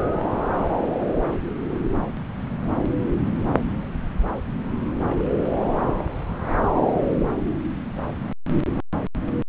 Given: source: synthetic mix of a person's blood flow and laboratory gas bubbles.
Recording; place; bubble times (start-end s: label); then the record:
Doppler ultrasound of blood flow; subclavian vein
5.07-5.21 s: bubbles
5.99-6.03 s: bubbles
6.74-6.85 s: bubbles
From the record:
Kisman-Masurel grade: 121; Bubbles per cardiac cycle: 1 to 2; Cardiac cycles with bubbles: 10 to 50%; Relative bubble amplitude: barely perceptible (0.100 to 0.250); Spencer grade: 2 (many but less than half of the cardiac periods contain bubble signals, singularly or in groups); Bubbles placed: anywhere in the cardiac cycle